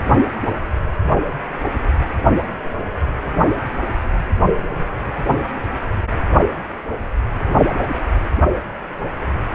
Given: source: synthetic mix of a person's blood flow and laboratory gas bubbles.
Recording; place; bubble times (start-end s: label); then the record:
Doppler ultrasound of blood flow; precordium
no bubbles
From the record:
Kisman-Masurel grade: 000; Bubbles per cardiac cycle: 0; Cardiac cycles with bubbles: 0%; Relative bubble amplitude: no bubbles discernible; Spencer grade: 0 (complete lack of bubble signals)